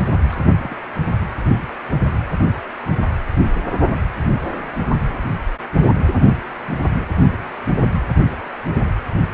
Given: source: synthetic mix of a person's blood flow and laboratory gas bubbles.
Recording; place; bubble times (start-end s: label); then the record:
Doppler ultrasound of blood flow; precordium
0.29-0.38 s: bubbles
0.62-0.76 s: bubbles
4.51-4.55 s: bubbles
6.80-6.85 s: bubbles
6.93-7.09 s: bubbles
From the record:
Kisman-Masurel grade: 121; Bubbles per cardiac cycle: 1 to 2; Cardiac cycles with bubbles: 10 to 50%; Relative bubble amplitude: barely perceptible (0.100 to 0.250); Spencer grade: 2 (many but less than half of the cardiac periods contain bubble signals, singularly or in groups); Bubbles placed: only in the low amplitude regions of the cardiac cycle